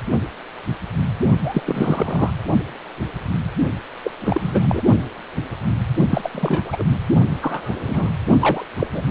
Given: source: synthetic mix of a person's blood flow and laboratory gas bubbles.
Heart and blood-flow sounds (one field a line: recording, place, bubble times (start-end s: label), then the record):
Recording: Doppler ultrasound of blood flow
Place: precordium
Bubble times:
1.44-1.61 s: bubbles
1.66-2.30 s: bubbles
4.03-4.11 s: bubbles
4.20-4.83 s: bubbles
6.11-6.30 s: bubbles
6.33-6.85 s: bubbles
7.41-8.10 s: bubbles
8.39-8.66 s: bubbles
8.79-8.87 s: bubbles
8.93-9.03 s: bubbles
From the record:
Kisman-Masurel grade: 233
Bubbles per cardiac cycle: several, 3 to 8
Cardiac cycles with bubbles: 50 to 99%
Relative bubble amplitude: loud (0.450 to 0.775)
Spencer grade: 3 (all of the cardiac periods contain showers or single bubble signals, but not dominating or overriding the cardiac motion signals)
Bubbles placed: only in the low amplitude regions of the cardiac cycle